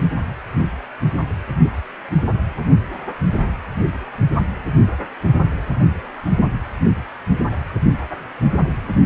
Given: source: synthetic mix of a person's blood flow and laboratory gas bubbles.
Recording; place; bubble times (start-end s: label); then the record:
Doppler ultrasound of blood flow; precordium
no bubbles
From the record:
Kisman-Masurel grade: 000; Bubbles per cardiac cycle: 0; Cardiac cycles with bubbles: 0%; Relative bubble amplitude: no bubbles discernible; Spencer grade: 0 (complete lack of bubble signals)